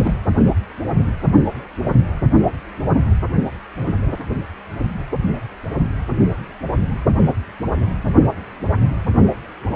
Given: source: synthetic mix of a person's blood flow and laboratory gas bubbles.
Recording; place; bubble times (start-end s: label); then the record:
Doppler ultrasound of blood flow; precordium
0.00-0.14 s: bubbles
From the record:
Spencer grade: 2 (many but less than half of the cardiac periods contain bubble signals, singularly or in groups); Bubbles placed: only in the low amplitude regions of the cardiac cycle